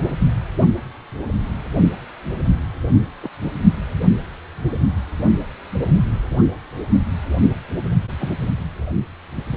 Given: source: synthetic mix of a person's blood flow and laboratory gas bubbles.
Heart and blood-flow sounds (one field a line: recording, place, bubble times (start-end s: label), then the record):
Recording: Doppler ultrasound of blood flow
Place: precordium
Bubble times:
0.00-0.11 s: bubbles
3.21-3.29 s: bubbles
6.36-6.42 s: bubbles
8.19-8.37 s: bubbles
From the record:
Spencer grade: 2 (many but less than half of the cardiac periods contain bubble signals, singularly or in groups)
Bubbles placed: anywhere in the cardiac cycle